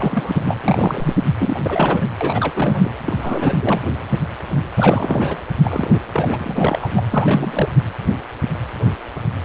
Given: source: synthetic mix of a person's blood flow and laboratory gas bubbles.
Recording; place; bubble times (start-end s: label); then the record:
Doppler ultrasound of blood flow; precordium
0.00-0.57 s: bubbles
0.62-1.16 s: bubbles
1.39-1.59 s: bubbles
1.62-2.08 s: bubbles
2.21-2.90 s: bubbles
3.06-3.82 s: bubbles
4.77-5.37 s: bubbles
5.63-6.00 s: bubbles
6.13-6.88 s: bubbles
6.94-7.03 s: bubbles
7.11-7.75 s: bubbles
From the record:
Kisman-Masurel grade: 332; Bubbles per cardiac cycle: rolling drumbeat, 9 or more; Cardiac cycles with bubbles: 50 to 99%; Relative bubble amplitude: moderate (0.250 to 0.450); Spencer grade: 3 (all of the cardiac periods contain showers or single bubble signals, but not dominating or overriding the cardiac motion signals); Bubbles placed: anywhere in the cardiac cycle